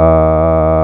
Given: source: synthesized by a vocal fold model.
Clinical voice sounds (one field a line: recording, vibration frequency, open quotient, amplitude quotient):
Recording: sustained vowel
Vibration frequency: 80 Hz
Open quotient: 0.5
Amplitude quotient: 1